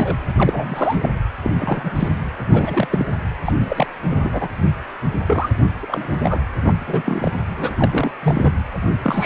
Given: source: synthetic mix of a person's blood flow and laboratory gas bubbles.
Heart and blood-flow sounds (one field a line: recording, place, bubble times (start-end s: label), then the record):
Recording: Doppler ultrasound of blood flow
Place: precordium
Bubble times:
0.00-0.17 s: bubbles
0.38-1.00 s: bubbles
1.02-1.09 s: bubbles
1.43-1.51 s: bubbles
1.59-1.91 s: bubbles
1.95-2.08 s: bubbles
2.50-2.88 s: bubbles
2.90-3.06 s: bubbles
3.45-3.53 s: bubbles
3.60-3.86 s: bubbles
4.02-4.48 s: bubbles
5.27-5.50 s: bubbles
5.80-6.40 s: bubbles
6.65-6.72 s: bubbles
6.86-7.31 s: bubbles
7.56-8.11 s: bubbles
8.23-8.53 s: bubbles
9.03-9.26 s: bubbles
From the record:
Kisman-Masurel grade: 242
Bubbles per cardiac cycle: several, 3 to 8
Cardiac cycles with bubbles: 100%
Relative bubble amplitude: moderate (0.250 to 0.450)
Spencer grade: 3 (all of the cardiac periods contain showers or single bubble signals, but not dominating or overriding the cardiac motion signals)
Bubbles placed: anywhere in the cardiac cycle